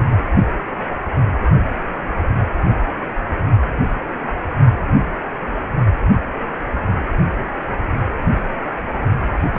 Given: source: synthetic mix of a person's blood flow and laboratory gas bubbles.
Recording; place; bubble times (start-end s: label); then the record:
Doppler ultrasound of blood flow; precordium
9.54-9.59 s: bubbles
From the record:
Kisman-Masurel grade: 223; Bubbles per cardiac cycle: several, 3 to 8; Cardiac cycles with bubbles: 10 to 50%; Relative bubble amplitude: loud (0.450 to 0.775); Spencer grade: 2 (many but less than half of the cardiac periods contain bubble signals, singularly or in groups); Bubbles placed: only in the low amplitude regions of the cardiac cycle